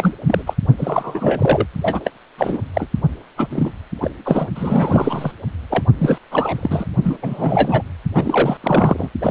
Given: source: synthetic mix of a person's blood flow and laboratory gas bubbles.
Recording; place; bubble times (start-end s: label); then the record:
Doppler ultrasound of blood flow; precordium
0.00-0.14 s: bubbles
0.26-0.43 s: bubbles
0.46-0.53 s: bubbles
0.78-1.66 s: bubbles
1.81-2.00 s: bubbles
2.04-2.10 s: bubbles
2.38-2.59 s: bubbles
2.73-2.88 s: bubbles
3.37-3.72 s: bubbles
4.01-4.10 s: bubbles
4.24-4.48 s: bubbles
4.55-5.31 s: bubbles
5.70-5.83 s: bubbles
5.98-6.18 s: bubbles
6.31-6.88 s: bubbles
7.02-7.17 s: bubbles
7.22-7.82 s: bubbles
8.15-8.58 s: bubbles
8.63-9.09 s: bubbles
9.21-9.31 s: bubbles
From the record:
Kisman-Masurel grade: 343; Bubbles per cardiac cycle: rolling drumbeat, 9 or more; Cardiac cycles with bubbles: 100%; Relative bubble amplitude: loud (0.450 to 0.775); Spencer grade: 3 (all of the cardiac periods contain showers or single bubble signals, but not dominating or overriding the cardiac motion signals); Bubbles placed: only in the low amplitude regions of the cardiac cycle